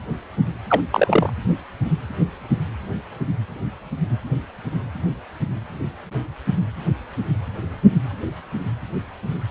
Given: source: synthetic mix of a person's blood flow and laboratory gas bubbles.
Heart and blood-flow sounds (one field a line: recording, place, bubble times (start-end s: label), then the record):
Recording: Doppler ultrasound of blood flow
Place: precordium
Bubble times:
0.69-0.80 s: bubbles
0.92-1.31 s: bubbles
From the record:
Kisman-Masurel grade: 113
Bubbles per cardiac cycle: 1 to 2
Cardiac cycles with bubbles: 1 to 10%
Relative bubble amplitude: loud (0.450 to 0.775)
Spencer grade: 1 (occasional bubble signal discernible with the cardiac motion signal, with majority of cardiac periods free of bubbles)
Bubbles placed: anywhere in the cardiac cycle